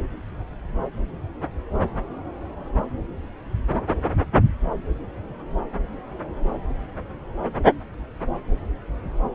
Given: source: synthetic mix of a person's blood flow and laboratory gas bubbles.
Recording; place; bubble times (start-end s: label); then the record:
Doppler ultrasound of blood flow; subclavian vein
no bubbles
From the record:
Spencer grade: 0 (complete lack of bubble signals)